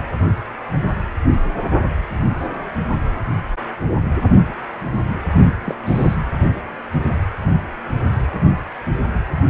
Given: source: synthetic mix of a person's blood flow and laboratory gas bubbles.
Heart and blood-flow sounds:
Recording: Doppler ultrasound of blood flow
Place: precordium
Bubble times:
5.35-5.55 s: bubbles
5.65-5.74 s: bubbles
5.85-6.15 s: bubbles
From the record:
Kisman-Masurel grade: 212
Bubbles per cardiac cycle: several, 3 to 8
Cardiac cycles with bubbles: 1 to 10%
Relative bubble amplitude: moderate (0.250 to 0.450)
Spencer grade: 1 (occasional bubble signal discernible with the cardiac motion signal, with majority of cardiac periods free of bubbles)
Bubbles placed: anywhere in the cardiac cycle

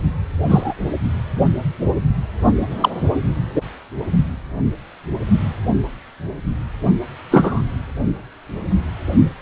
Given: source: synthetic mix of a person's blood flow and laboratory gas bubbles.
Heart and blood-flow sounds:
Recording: Doppler ultrasound of blood flow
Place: precordium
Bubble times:
0.48-0.73 s: bubbles
2.80-2.90 s: bubbles
3.55-3.62 s: bubbles
7.31-7.62 s: bubbles
From the record:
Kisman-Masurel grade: 123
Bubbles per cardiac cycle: 1 to 2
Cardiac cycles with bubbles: 10 to 50%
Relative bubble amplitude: loud (0.450 to 0.775)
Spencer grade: 2 (many but less than half of the cardiac periods contain bubble signals, singularly or in groups)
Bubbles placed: only in the low amplitude regions of the cardiac cycle

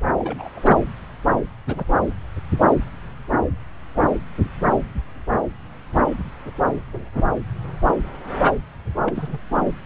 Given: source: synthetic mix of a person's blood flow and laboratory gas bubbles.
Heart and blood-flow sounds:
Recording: Doppler ultrasound of blood flow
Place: subclavian vein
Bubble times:
0.19-0.51 s: bubbles
0.53-0.60 s: bubbles
0.63-0.75 s: bubbles
1.67-2.14 s: bubbles
9.06-9.38 s: bubbles
From the record:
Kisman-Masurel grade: 221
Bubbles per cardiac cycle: several, 3 to 8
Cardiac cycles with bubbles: 10 to 50%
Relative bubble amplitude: barely perceptible (0.100 to 0.250)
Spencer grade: 2 (many but less than half of the cardiac periods contain bubble signals, singularly or in groups)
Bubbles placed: anywhere in the cardiac cycle

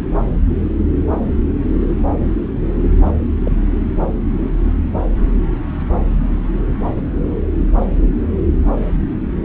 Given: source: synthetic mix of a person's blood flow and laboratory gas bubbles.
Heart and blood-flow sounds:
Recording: Doppler ultrasound of blood flow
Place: subclavian vein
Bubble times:
3.04-3.12 s: bubbles
3.44-3.52 s: bubbles
4.40-4.48 s: bubbles
6.96-7.02 s: bubbles
From the record:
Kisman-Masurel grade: 122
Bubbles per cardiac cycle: 1 to 2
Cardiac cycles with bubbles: 10 to 50%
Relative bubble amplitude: moderate (0.250 to 0.450)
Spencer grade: 2 (many but less than half of the cardiac periods contain bubble signals, singularly or in groups)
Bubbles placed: anywhere in the cardiac cycle

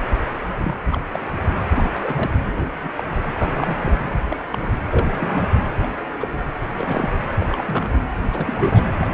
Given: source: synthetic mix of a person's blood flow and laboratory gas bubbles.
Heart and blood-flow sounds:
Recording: Doppler ultrasound of blood flow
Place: precordium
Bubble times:
0.56-0.77 s: bubbles
0.90-1.01 s: bubbles
1.11-1.20 s: bubbles
1.76-2.31 s: bubbles
2.45-2.68 s: bubbles
2.85-2.89 s: bubbles
2.97-3.03 s: bubbles
3.40-3.77 s: bubbles
3.81-4.19 s: bubbles
4.28-4.36 s: bubbles
4.52-4.71 s: bubbles
4.89-5.48 s: bubbles
5.82-5.88 s: bubbles
6.19-6.28 s: bubbles
6.78-7.10 s: bubbles
7.40-7.46 s: bubbles
7.49-7.64 s: bubbles
7.67-7.92 s: bubbles
8.31-8.88 s: bubbles
8.99-9.07 s: bubbles
From the record:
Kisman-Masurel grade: 242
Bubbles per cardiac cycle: several, 3 to 8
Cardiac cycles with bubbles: 100%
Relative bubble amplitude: moderate (0.250 to 0.450)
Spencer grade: 3 (all of the cardiac periods contain showers or single bubble signals, but not dominating or overriding the cardiac motion signals)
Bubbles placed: anywhere in the cardiac cycle

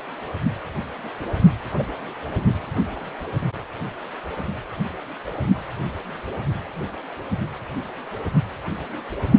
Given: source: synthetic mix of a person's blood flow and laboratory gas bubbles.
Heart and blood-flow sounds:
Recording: Doppler ultrasound of blood flow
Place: precordium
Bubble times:
1.78-1.83 s: bubbles
From the record:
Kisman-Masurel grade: 113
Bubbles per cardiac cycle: 1 to 2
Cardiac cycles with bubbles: 1 to 10%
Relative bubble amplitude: loud (0.450 to 0.775)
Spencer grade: 1 (occasional bubble signal discernible with the cardiac motion signal, with majority of cardiac periods free of bubbles)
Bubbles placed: only in the low amplitude regions of the cardiac cycle

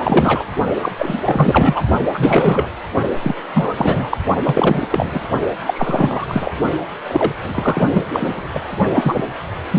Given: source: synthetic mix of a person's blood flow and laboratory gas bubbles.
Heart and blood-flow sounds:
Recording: Doppler ultrasound of blood flow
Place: precordium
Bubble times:
0.00-0.44 s: bubbles
0.81-0.92 s: bubbles
0.97-1.20 s: bubbles
1.24-1.82 s: bubbles
2.05-2.11 s: bubbles
2.14-2.68 s: bubbles
3.23-3.34 s: bubbles
3.54-3.74 s: bubbles
3.77-4.17 s: bubbles
4.44-5.22 s: bubbles
5.66-6.51 s: bubbles
7.07-7.31 s: bubbles
7.43-8.04 s: bubbles
8.12-8.42 s: bubbles
8.52-8.62 s: bubbles
8.93-9.25 s: bubbles
9.71-9.78 s: bubbles
From the record:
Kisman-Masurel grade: 343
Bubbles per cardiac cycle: rolling drumbeat, 9 or more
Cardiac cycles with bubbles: 100%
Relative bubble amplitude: loud (0.450 to 0.775)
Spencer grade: 3 (all of the cardiac periods contain showers or single bubble signals, but not dominating or overriding the cardiac motion signals)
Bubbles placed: only in the low amplitude regions of the cardiac cycle

